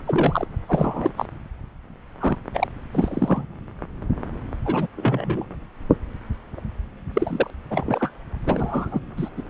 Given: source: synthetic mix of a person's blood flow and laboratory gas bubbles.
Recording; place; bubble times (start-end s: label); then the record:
Doppler ultrasound of blood flow; subclavian vein
0.07-0.46 s: bubbles
0.68-1.13 s: bubbles
1.17-1.26 s: bubbles
2.20-2.37 s: bubbles
2.54-2.67 s: bubbles
2.92-3.46 s: bubbles
4.65-4.87 s: bubbles
4.97-5.45 s: bubbles
7.14-7.51 s: bubbles
7.70-8.11 s: bubbles
8.46-9.00 s: bubbles
9.16-9.29 s: bubbles
9.37-9.42 s: bubbles
From the record:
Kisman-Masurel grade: 232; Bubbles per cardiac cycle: several, 3 to 8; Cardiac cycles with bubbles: 50 to 99%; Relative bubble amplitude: moderate (0.250 to 0.450); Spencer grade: 3 (all of the cardiac periods contain showers or single bubble signals, but not dominating or overriding the cardiac motion signals); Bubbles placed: anywhere in the cardiac cycle